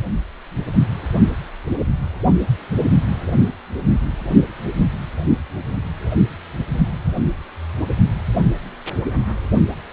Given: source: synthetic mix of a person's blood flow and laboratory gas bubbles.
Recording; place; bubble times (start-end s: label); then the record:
Doppler ultrasound of blood flow; precordium
no bubbles
From the record:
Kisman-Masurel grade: 000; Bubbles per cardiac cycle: 0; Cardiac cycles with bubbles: 0%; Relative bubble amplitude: no bubbles discernible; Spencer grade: 0 (complete lack of bubble signals)